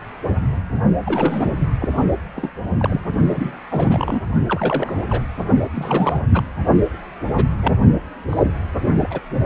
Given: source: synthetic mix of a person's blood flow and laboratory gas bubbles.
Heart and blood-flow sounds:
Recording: Doppler ultrasound of blood flow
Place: precordium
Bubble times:
1.06-1.53 s: bubbles
1.80-1.89 s: bubbles
2.35-2.51 s: bubbles
2.79-3.00 s: bubbles
3.30-3.56 s: bubbles
3.70-4.21 s: bubbles
4.46-5.03 s: bubbles
5.08-5.22 s: bubbles
5.74-6.21 s: bubbles
6.29-6.43 s: bubbles
7.33-7.46 s: bubbles
7.62-7.73 s: bubbles
8.29-8.43 s: bubbles
9.00-9.20 s: bubbles
From the record:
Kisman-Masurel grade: 232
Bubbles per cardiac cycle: several, 3 to 8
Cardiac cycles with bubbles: 50 to 99%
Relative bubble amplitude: moderate (0.250 to 0.450)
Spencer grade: 3 (all of the cardiac periods contain showers or single bubble signals, but not dominating or overriding the cardiac motion signals)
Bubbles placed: only in the low amplitude regions of the cardiac cycle

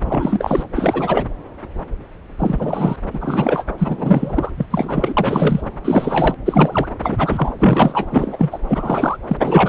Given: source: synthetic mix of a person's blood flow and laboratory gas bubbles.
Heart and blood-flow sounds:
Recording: Doppler ultrasound of blood flow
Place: subclavian vein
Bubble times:
0.05-0.64 s: bubbles
0.74-1.25 s: bubbles
2.39-2.96 s: bubbles
3.12-3.63 s: bubbles
3.78-4.50 s: bubbles
4.57-4.66 s: bubbles
4.70-5.13 s: bubbles
5.17-5.62 s: bubbles
5.84-6.36 s: bubbles
6.45-6.88 s: bubbles
7.02-7.52 s: bubbles
7.58-8.06 s: bubbles
8.12-8.58 s: bubbles
8.68-9.17 s: bubbles
9.28-9.37 s: bubbles
9.41-9.69 s: bubbles
From the record:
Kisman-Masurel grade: 333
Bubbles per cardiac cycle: rolling drumbeat, 9 or more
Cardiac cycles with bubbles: 50 to 99%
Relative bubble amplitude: loud (0.450 to 0.775)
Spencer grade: 3 (all of the cardiac periods contain showers or single bubble signals, but not dominating or overriding the cardiac motion signals)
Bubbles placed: anywhere in the cardiac cycle

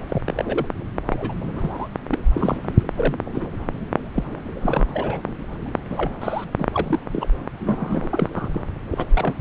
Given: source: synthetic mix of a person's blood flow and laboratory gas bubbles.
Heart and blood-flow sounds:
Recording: Doppler ultrasound of blood flow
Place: subclavian vein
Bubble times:
0.00-0.19 s: bubbles
0.26-0.66 s: bubbles
1.07-1.34 s: bubbles
1.56-1.88 s: bubbles
2.11-2.19 s: bubbles
2.34-2.57 s: bubbles
2.63-2.71 s: bubbles
2.79-2.82 s: bubbles
2.95-3.15 s: bubbles
3.32-3.50 s: bubbles
4.15-4.24 s: bubbles
4.62-4.85 s: bubbles
4.94-5.21 s: bubbles
5.90-6.12 s: bubbles
6.21-6.45 s: bubbles
6.59-6.65 s: bubbles
6.74-6.99 s: bubbles
7.11-7.29 s: bubbles
7.60-8.29 s: bubbles
8.35-8.48 s: bubbles
8.54-8.61 s: bubbles
8.91-9.06 s: bubbles
9.14-9.33 s: bubbles
From the record:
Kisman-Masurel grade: 242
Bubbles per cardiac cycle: several, 3 to 8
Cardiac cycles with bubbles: 100%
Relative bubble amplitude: moderate (0.250 to 0.450)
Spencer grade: 3 (all of the cardiac periods contain showers or single bubble signals, but not dominating or overriding the cardiac motion signals)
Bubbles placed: anywhere in the cardiac cycle

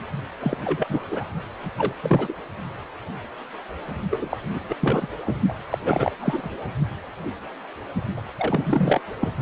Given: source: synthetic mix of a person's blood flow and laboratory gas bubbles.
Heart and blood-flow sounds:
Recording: Doppler ultrasound of blood flow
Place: precordium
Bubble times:
0.41-0.57 s: bubbles
0.65-1.03 s: bubbles
1.10-1.26 s: bubbles
1.63-1.71 s: bubbles
1.78-1.94 s: bubbles
2.01-2.33 s: bubbles
4.10-4.38 s: bubbles
4.50-4.60 s: bubbles
4.69-4.75 s: bubbles
4.79-5.08 s: bubbles
5.26-5.34 s: bubbles
5.48-5.53 s: bubbles
5.70-5.78 s: bubbles
5.84-6.12 s: bubbles
6.19-6.58 s: bubbles
8.17-8.21 s: bubbles
8.38-9.00 s: bubbles
9.20-9.32 s: bubbles
From the record:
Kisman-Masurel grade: 332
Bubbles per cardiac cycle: rolling drumbeat, 9 or more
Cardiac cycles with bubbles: 50 to 99%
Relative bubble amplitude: moderate (0.250 to 0.450)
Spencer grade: 3 (all of the cardiac periods contain showers or single bubble signals, but not dominating or overriding the cardiac motion signals)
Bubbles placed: only in the low amplitude regions of the cardiac cycle

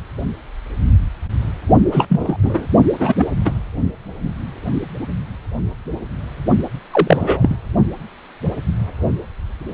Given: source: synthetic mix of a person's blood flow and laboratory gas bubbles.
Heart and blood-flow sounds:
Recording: Doppler ultrasound of blood flow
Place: precordium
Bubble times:
1.92-2.37 s: bubbles
2.42-2.67 s: bubbles
2.98-3.15 s: bubbles
3.17-3.27 s: bubbles
3.44-3.52 s: bubbles
6.92-7.56 s: bubbles
From the record:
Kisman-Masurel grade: 233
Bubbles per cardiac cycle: several, 3 to 8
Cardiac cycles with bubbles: 50 to 99%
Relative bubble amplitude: loud (0.450 to 0.775)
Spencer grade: 3 (all of the cardiac periods contain showers or single bubble signals, but not dominating or overriding the cardiac motion signals)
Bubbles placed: only in the low amplitude regions of the cardiac cycle

